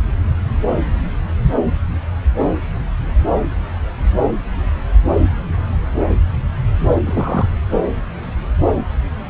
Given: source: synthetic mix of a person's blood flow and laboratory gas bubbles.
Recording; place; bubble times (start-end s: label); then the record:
Doppler ultrasound of blood flow; subclavian vein
6.94-7.48 s: bubbles
From the record:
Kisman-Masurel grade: 212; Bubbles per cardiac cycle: several, 3 to 8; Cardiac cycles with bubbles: 1 to 10%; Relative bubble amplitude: moderate (0.250 to 0.450); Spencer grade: 1 (occasional bubble signal discernible with the cardiac motion signal, with majority of cardiac periods free of bubbles); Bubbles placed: anywhere in the cardiac cycle